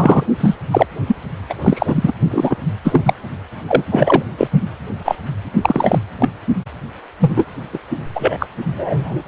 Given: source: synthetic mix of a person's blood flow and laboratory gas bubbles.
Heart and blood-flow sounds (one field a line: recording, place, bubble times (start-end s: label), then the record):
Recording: Doppler ultrasound of blood flow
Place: precordium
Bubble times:
0.00-0.23 s: bubbles
0.40-0.54 s: bubbles
0.71-0.86 s: bubbles
1.06-1.16 s: bubbles
1.49-1.55 s: bubbles
1.61-2.13 s: bubbles
2.30-2.58 s: bubbles
2.84-3.14 s: bubbles
3.68-3.82 s: bubbles
3.91-4.22 s: bubbles
4.38-4.47 s: bubbles
4.52-4.62 s: bubbles
5.04-5.15 s: bubbles
5.61-5.98 s: bubbles
6.20-6.30 s: bubbles
7.20-7.45 s: bubbles
7.73-7.79 s: bubbles
8.15-8.46 s: bubbles
8.67-9.23 s: bubbles
From the record:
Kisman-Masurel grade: 243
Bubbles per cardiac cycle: several, 3 to 8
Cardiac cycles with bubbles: 100%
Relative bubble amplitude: loud (0.450 to 0.775)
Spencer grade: 3 (all of the cardiac periods contain showers or single bubble signals, but not dominating or overriding the cardiac motion signals)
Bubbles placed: only in the low amplitude regions of the cardiac cycle